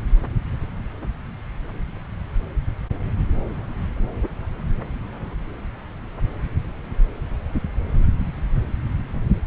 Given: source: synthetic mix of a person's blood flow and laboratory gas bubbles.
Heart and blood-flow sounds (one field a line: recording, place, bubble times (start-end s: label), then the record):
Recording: Doppler ultrasound of blood flow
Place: subclavian vein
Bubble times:
no bubbles
From the record:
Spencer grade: 0 (complete lack of bubble signals)